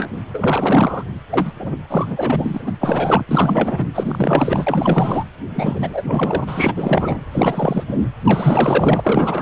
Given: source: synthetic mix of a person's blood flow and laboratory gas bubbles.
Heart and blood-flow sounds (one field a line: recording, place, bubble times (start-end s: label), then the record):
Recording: Doppler ultrasound of blood flow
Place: precordium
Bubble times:
0.00-0.09 s: bubbles
0.34-1.04 s: bubbles
1.29-1.52 s: bubbles
1.59-1.75 s: bubbles
1.89-2.72 s: bubbles
2.80-3.25 s: bubbles
3.29-3.87 s: bubbles
3.94-5.24 s: bubbles
5.54-7.25 s: bubbles
7.32-7.84 s: bubbles
7.87-8.07 s: bubbles
8.24-9.42 s: bubbles
From the record:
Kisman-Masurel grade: 444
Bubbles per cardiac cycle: continuous sound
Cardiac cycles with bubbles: 100%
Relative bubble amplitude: maximal (0.775 to 0.999)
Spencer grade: 4 (maximum detectable bubble signal sounding continuously throughout systole and diastole of every cardiac period, and overriding the amplitude of the normal cardiac signals)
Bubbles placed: anywhere in the cardiac cycle